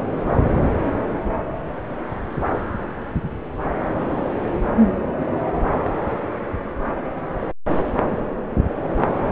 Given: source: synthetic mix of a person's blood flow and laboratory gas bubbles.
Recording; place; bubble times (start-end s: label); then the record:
Doppler ultrasound of blood flow; subclavian vein
no bubbles
From the record:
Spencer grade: 0 (complete lack of bubble signals)